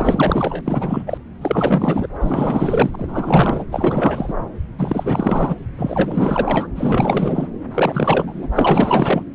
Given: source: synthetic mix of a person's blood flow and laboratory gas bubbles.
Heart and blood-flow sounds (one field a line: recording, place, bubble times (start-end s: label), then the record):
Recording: Doppler ultrasound of blood flow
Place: subclavian vein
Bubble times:
0.00-0.61 s: bubbles
0.65-1.18 s: bubbles
1.41-2.07 s: bubbles
2.20-2.90 s: bubbles
2.94-2.96 s: bubbles
2.98-3.64 s: bubbles
3.71-4.34 s: bubbles
4.79-5.55 s: bubbles
5.78-6.67 s: bubbles
6.75-7.50 s: bubbles
7.72-8.47 s: bubbles
8.53-9.23 s: bubbles
From the record:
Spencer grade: 4 (maximum detectable bubble signal sounding continuously throughout systole and diastole of every cardiac period, and overriding the amplitude of the normal cardiac signals)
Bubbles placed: anywhere in the cardiac cycle